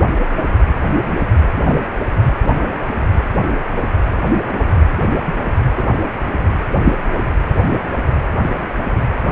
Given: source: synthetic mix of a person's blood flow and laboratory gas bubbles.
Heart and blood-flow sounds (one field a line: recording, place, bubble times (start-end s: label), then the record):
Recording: Doppler ultrasound of blood flow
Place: precordium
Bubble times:
1.65-1.79 s: bubbles
5.25-5.36 s: bubbles
5.77-5.82 s: bubbles
6.83-6.98 s: bubbles
From the record:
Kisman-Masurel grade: 123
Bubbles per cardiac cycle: 1 to 2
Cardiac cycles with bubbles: 10 to 50%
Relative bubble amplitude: loud (0.450 to 0.775)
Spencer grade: 2 (many but less than half of the cardiac periods contain bubble signals, singularly or in groups)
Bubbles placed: anywhere in the cardiac cycle